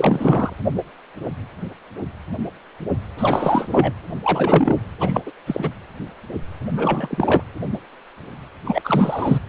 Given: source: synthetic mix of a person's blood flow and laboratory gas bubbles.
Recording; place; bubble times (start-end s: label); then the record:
Doppler ultrasound of blood flow; precordium
0.00-0.53 s: bubbles
3.17-3.93 s: bubbles
4.24-4.75 s: bubbles
5.00-5.21 s: bubbles
5.26-5.32 s: bubbles
5.46-5.70 s: bubbles
6.71-7.42 s: bubbles
8.64-8.81 s: bubbles
8.84-9.40 s: bubbles
From the record:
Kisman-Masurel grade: 333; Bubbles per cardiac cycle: rolling drumbeat, 9 or more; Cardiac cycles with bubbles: 50 to 99%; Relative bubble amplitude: loud (0.450 to 0.775); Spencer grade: 3 (all of the cardiac periods contain showers or single bubble signals, but not dominating or overriding the cardiac motion signals); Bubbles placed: anywhere in the cardiac cycle